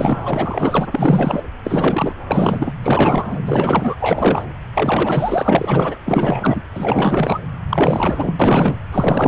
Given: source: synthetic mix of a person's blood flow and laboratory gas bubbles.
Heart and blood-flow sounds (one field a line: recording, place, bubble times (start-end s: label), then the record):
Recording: Doppler ultrasound of blood flow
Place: subclavian vein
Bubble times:
0.00-0.86 s: bubbles
0.92-1.43 s: bubbles
1.63-2.25 s: bubbles
2.27-2.73 s: bubbles
2.82-3.38 s: bubbles
3.46-3.95 s: bubbles
3.99-4.47 s: bubbles
4.74-5.98 s: bubbles
6.05-6.62 s: bubbles
6.74-7.39 s: bubbles
7.69-8.34 s: bubbles
8.39-8.78 s: bubbles
8.91-9.28 s: bubbles
From the record:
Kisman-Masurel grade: 444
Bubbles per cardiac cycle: continuous sound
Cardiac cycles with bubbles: 100%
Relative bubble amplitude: maximal (0.775 to 0.999)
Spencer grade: 4 (maximum detectable bubble signal sounding continuously throughout systole and diastole of every cardiac period, and overriding the amplitude of the normal cardiac signals)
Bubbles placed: anywhere in the cardiac cycle